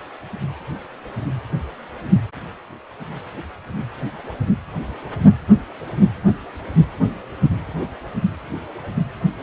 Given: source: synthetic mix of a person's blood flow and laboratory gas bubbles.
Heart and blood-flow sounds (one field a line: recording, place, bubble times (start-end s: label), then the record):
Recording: Doppler ultrasound of blood flow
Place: precordium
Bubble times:
no bubbles
From the record:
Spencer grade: 0 (complete lack of bubble signals)